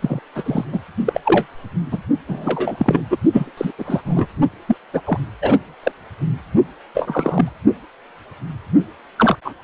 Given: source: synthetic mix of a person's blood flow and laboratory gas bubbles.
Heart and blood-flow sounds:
Doppler ultrasound of blood flow; precordium
0.01-0.20 s: bubbles
0.35-0.64 s: bubbles
0.71-0.81 s: bubbles
1.06-1.21 s: bubbles
1.23-1.46 s: bubbles
1.91-1.99 s: bubbles
2.27-3.04 s: bubbles
3.10-3.17 s: bubbles
3.33-3.51 s: bubbles
3.57-3.72 s: bubbles
3.78-4.26 s: bubbles
4.67-4.76 s: bubbles
4.93-5.01 s: bubbles
5.06-5.19 s: bubbles
5.42-5.58 s: bubbles
5.83-5.92 s: bubbles
6.94-7.52 s: bubbles
9.18-9.37 s: bubbles
9.44-9.54 s: bubbles
From the record:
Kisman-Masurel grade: 243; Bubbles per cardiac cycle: several, 3 to 8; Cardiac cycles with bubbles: 100%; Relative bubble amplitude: loud (0.450 to 0.775); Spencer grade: 3 (all of the cardiac periods contain showers or single bubble signals, but not dominating or overriding the cardiac motion signals); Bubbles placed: only in the low amplitude regions of the cardiac cycle

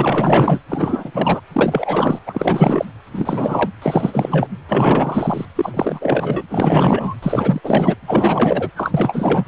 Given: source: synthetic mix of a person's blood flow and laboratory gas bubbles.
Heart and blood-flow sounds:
Doppler ultrasound of blood flow; precordium
0.00-0.59 s: bubbles
0.68-1.41 s: bubbles
1.52-2.19 s: bubbles
2.27-2.85 s: bubbles
3.14-3.69 s: bubbles
3.82-4.48 s: bubbles
4.69-5.46 s: bubbles
5.55-6.42 s: bubbles
6.50-7.15 s: bubbles
7.22-7.61 s: bubbles
7.63-7.95 s: bubbles
8.06-8.71 s: bubbles
8.76-9.44 s: bubbles
From the record:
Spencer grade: 4 (maximum detectable bubble signal sounding continuously throughout systole and diastole of every cardiac period, and overriding the amplitude of the normal cardiac signals); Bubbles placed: anywhere in the cardiac cycle

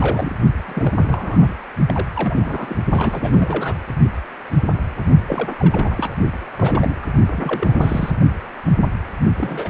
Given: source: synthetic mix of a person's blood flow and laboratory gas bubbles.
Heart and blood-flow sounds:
Doppler ultrasound of blood flow; precordium
0.00-0.33 s: bubbles
0.66-0.94 s: bubbles
0.97-1.53 s: bubbles
1.86-2.07 s: bubbles
2.15-2.77 s: bubbles
2.88-3.77 s: bubbles
5.27-5.54 s: bubbles
5.59-6.16 s: bubbles
6.57-6.95 s: bubbles
7.02-7.07 s: bubbles
7.30-8.12 s: bubbles
9.35-9.69 s: bubbles
From the record:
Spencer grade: 3 (all of the cardiac periods contain showers or single bubble signals, but not dominating or overriding the cardiac motion signals); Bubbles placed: only in the low amplitude regions of the cardiac cycle

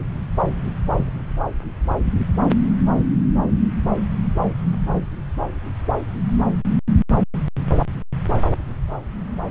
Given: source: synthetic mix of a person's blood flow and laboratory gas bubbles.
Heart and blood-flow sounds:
Doppler ultrasound of blood flow; subclavian vein
no bubbles
From the record:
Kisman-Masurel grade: 000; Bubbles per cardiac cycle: 0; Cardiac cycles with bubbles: 0%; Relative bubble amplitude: no bubbles discernible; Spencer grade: 0 (complete lack of bubble signals)

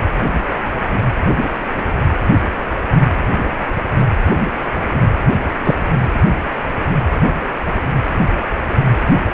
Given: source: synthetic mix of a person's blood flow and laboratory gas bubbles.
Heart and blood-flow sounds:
Doppler ultrasound of blood flow; precordium
5.64-5.75 s: bubbles
From the record:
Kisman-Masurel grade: 113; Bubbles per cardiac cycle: 1 to 2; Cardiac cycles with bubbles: 1 to 10%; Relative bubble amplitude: loud (0.450 to 0.775); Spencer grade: 1 (occasional bubble signal discernible with the cardiac motion signal, with majority of cardiac periods free of bubbles); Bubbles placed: anywhere in the cardiac cycle

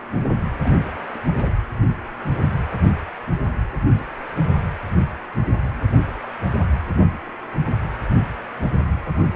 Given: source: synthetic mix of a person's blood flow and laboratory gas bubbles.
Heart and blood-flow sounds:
Doppler ultrasound of blood flow; precordium
0.64-0.73 s: bubbles
1.15-1.18 s: bubbles
1.27-1.49 s: bubbles
From the record:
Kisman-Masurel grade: 211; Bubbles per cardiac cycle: several, 3 to 8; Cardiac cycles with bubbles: 1 to 10%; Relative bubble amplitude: barely perceptible (0.100 to 0.250); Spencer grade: 1 (occasional bubble signal discernible with the cardiac motion signal, with majority of cardiac periods free of bubbles); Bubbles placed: anywhere in the cardiac cycle

